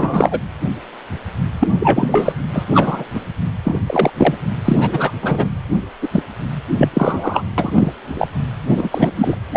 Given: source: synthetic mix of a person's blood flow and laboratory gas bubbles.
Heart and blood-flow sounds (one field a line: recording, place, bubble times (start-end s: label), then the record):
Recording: Doppler ultrasound of blood flow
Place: precordium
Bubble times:
0.00-0.40 s: bubbles
1.59-1.68 s: bubbles
1.79-2.33 s: bubbles
2.53-2.65 s: bubbles
2.74-3.04 s: bubbles
3.15-3.21 s: bubbles
3.64-3.79 s: bubbles
3.86-4.12 s: bubbles
4.17-4.34 s: bubbles
4.64-5.12 s: bubbles
5.22-5.49 s: bubbles
6.01-6.08 s: bubbles
6.12-6.23 s: bubbles
6.78-6.89 s: bubbles
6.93-7.42 s: bubbles
7.58-7.92 s: bubbles
8.14-8.28 s: bubbles
8.67-9.11 s: bubbles
9.16-9.37 s: bubbles
9.53-9.57 s: bubbles
From the record:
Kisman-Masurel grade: 233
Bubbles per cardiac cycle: several, 3 to 8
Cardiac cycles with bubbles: 50 to 99%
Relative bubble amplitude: loud (0.450 to 0.775)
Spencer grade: 3 (all of the cardiac periods contain showers or single bubble signals, but not dominating or overriding the cardiac motion signals)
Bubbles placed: anywhere in the cardiac cycle